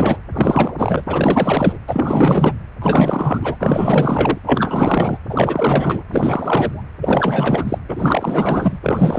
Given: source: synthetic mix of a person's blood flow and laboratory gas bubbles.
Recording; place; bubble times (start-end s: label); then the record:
Doppler ultrasound of blood flow; precordium
0.00-0.17 s: bubbles
0.33-0.74 s: bubbles
0.77-1.04 s: bubbles
1.06-1.78 s: bubbles
1.87-2.52 s: bubbles
2.82-3.56 s: bubbles
3.60-4.39 s: bubbles
4.45-5.18 s: bubbles
5.29-6.04 s: bubbles
6.08-6.83 s: bubbles
7.00-7.78 s: bubbles
7.89-8.79 s: bubbles
8.82-9.19 s: bubbles
From the record:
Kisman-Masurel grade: 444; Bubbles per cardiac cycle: continuous sound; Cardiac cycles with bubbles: 100%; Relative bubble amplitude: maximal (0.775 to 0.999); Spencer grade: 4 (maximum detectable bubble signal sounding continuously throughout systole and diastole of every cardiac period, and overriding the amplitude of the normal cardiac signals); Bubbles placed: anywhere in the cardiac cycle